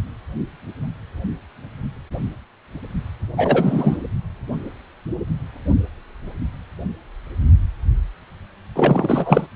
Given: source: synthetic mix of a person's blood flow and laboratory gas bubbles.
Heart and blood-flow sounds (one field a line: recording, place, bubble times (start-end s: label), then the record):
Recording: Doppler ultrasound of blood flow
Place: precordium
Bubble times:
3.36-3.98 s: bubbles
8.76-9.47 s: bubbles
From the record:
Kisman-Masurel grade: 223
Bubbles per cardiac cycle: several, 3 to 8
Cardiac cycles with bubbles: 10 to 50%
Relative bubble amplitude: loud (0.450 to 0.775)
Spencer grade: 2 (many but less than half of the cardiac periods contain bubble signals, singularly or in groups)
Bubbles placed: only in the low amplitude regions of the cardiac cycle